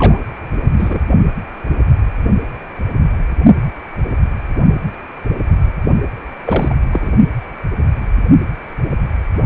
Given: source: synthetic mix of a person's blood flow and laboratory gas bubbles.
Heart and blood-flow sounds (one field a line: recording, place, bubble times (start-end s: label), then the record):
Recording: Doppler ultrasound of blood flow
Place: precordium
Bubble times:
0.00-0.18 s: bubbles
0.78-1.00 s: bubbles
6.45-6.75 s: bubbles
6.93-7.11 s: bubbles
From the record:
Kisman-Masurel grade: 222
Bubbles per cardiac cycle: several, 3 to 8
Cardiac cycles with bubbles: 10 to 50%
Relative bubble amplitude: moderate (0.250 to 0.450)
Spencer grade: 2 (many but less than half of the cardiac periods contain bubble signals, singularly or in groups)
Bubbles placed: only in the low amplitude regions of the cardiac cycle